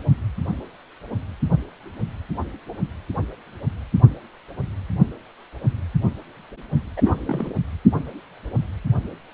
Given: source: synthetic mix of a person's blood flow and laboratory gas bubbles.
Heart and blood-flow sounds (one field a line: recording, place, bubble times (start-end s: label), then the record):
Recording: Doppler ultrasound of blood flow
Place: precordium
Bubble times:
6.96-7.01 s: bubbles
7.04-7.18 s: bubbles
7.25-7.55 s: bubbles
From the record:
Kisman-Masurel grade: 211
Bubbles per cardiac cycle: several, 3 to 8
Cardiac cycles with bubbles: 1 to 10%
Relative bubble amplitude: barely perceptible (0.100 to 0.250)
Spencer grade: 1 (occasional bubble signal discernible with the cardiac motion signal, with majority of cardiac periods free of bubbles)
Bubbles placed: only in the low amplitude regions of the cardiac cycle